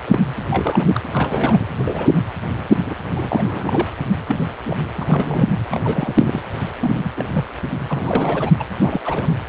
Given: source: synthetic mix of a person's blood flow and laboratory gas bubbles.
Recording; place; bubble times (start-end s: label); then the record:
Doppler ultrasound of blood flow; precordium
0.07-0.20 s: bubbles
0.50-1.00 s: bubbles
1.14-1.66 s: bubbles
1.77-2.21 s: bubbles
2.85-2.95 s: bubbles
3.12-3.89 s: bubbles
4.28-4.36 s: bubbles
4.65-4.77 s: bubbles
4.94-5.47 s: bubbles
5.71-6.42 s: bubbles
6.79-7.13 s: bubbles
7.17-7.26 s: bubbles
7.33-7.50 s: bubbles
7.89-8.51 s: bubbles
8.59-8.63 s: bubbles
8.82-9.34 s: bubbles
From the record:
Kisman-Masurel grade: 242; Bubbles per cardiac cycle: several, 3 to 8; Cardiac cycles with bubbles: 100%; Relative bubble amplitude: moderate (0.250 to 0.450); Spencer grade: 3 (all of the cardiac periods contain showers or single bubble signals, but not dominating or overriding the cardiac motion signals); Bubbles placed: anywhere in the cardiac cycle